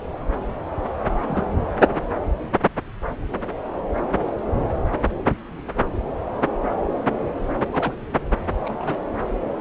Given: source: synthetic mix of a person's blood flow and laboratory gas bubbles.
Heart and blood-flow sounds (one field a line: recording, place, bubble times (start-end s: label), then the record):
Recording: Doppler ultrasound of blood flow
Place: subclavian vein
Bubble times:
1.27-1.45 s: bubbles
7.72-7.92 s: bubbles
8.64-8.97 s: bubbles
From the record:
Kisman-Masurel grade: 121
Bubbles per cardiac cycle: 1 to 2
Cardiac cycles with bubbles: 10 to 50%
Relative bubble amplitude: barely perceptible (0.100 to 0.250)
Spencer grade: 2 (many but less than half of the cardiac periods contain bubble signals, singularly or in groups)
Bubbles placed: anywhere in the cardiac cycle